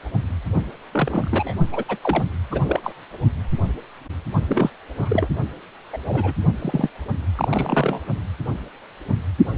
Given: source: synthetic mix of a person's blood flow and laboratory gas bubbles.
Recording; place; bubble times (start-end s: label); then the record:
Doppler ultrasound of blood flow; precordium
0.91-1.54 s: bubbles
1.72-1.84 s: bubbles
1.88-1.98 s: bubbles
2.03-2.23 s: bubbles
2.51-2.80 s: bubbles
2.83-2.92 s: bubbles
4.42-4.70 s: bubbles
4.99-5.28 s: bubbles
5.92-5.97 s: bubbles
6.07-6.34 s: bubbles
6.59-6.90 s: bubbles
7.35-8.01 s: bubbles
From the record:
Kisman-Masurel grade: 232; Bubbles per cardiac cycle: several, 3 to 8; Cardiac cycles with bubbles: 50 to 99%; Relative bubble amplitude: moderate (0.250 to 0.450); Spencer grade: 3 (all of the cardiac periods contain showers or single bubble signals, but not dominating or overriding the cardiac motion signals); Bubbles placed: only in the low amplitude regions of the cardiac cycle